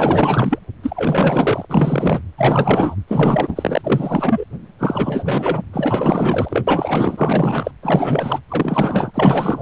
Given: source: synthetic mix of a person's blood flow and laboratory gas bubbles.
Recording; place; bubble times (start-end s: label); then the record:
Doppler ultrasound of blood flow; precordium
0.00-0.59 s: bubbles
0.83-1.66 s: bubbles
1.69-2.22 s: bubbles
2.37-2.96 s: bubbles
3.08-4.44 s: bubbles
4.79-5.62 s: bubbles
5.72-6.64 s: bubbles
6.67-7.71 s: bubbles
7.82-8.40 s: bubbles
8.48-9.12 s: bubbles
9.14-9.62 s: bubbles
From the record:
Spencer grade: 4 (maximum detectable bubble signal sounding continuously throughout systole and diastole of every cardiac period, and overriding the amplitude of the normal cardiac signals); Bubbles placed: anywhere in the cardiac cycle